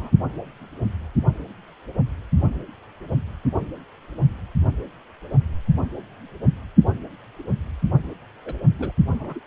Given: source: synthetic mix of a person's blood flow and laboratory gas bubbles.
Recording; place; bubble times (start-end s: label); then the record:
Doppler ultrasound of blood flow; precordium
0.00-0.10 s: bubbles
8.45-8.54 s: bubbles
8.79-8.92 s: bubbles
9.02-9.05 s: bubbles
9.09-9.15 s: bubbles
9.19-9.39 s: bubbles
From the record:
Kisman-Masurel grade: 221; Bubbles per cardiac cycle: several, 3 to 8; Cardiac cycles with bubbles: 10 to 50%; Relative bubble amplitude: barely perceptible (0.100 to 0.250); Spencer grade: 2 (many but less than half of the cardiac periods contain bubble signals, singularly or in groups); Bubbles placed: only in the low amplitude regions of the cardiac cycle